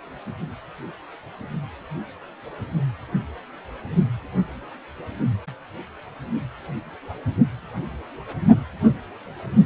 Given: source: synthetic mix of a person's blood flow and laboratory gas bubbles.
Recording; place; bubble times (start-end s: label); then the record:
Doppler ultrasound of blood flow; precordium
no bubbles
From the record:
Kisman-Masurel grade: 000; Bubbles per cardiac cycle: 0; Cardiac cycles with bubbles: 0%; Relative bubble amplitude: no bubbles discernible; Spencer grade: 0 (complete lack of bubble signals)